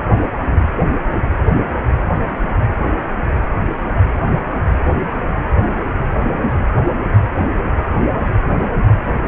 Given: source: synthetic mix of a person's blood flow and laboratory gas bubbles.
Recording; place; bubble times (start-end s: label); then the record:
Doppler ultrasound of blood flow; precordium
no bubbles
From the record:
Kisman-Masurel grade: 000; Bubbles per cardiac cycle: 0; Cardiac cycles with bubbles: 0%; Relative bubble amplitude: no bubbles discernible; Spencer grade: 0 (complete lack of bubble signals)